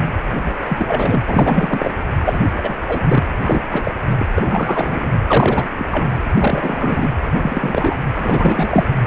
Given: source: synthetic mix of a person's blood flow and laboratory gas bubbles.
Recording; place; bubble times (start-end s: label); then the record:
Doppler ultrasound of blood flow; precordium
0.35-0.55 s: bubbles
0.66-1.23 s: bubbles
1.28-1.91 s: bubbles
2.25-2.46 s: bubbles
2.57-2.75 s: bubbles
2.88-3.30 s: bubbles
3.42-3.62 s: bubbles
3.70-3.91 s: bubbles
4.19-4.25 s: bubbles
4.36-5.08 s: bubbles
5.27-5.70 s: bubbles
5.78-5.85 s: bubbles
5.91-6.16 s: bubbles
6.35-7.10 s: bubbles
7.42-7.97 s: bubbles
8.14-8.84 s: bubbles
From the record:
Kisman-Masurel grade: 343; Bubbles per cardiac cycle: rolling drumbeat, 9 or more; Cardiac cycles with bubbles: 100%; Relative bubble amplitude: loud (0.450 to 0.775); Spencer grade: 3 (all of the cardiac periods contain showers or single bubble signals, but not dominating or overriding the cardiac motion signals); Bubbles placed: anywhere in the cardiac cycle